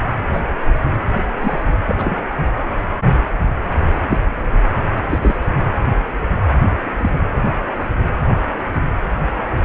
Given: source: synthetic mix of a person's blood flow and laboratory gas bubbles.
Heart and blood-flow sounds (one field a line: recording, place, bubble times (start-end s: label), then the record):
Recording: Doppler ultrasound of blood flow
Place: precordium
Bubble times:
0.32-0.41 s: bubbles
1.41-1.62 s: bubbles
1.86-2.17 s: bubbles
4.09-4.18 s: bubbles
5.09-5.19 s: bubbles
5.22-5.38 s: bubbles
6.99-7.09 s: bubbles
From the record:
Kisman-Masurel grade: 122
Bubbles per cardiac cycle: 1 to 2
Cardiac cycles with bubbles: 10 to 50%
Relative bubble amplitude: moderate (0.250 to 0.450)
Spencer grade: 2 (many but less than half of the cardiac periods contain bubble signals, singularly or in groups)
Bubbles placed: anywhere in the cardiac cycle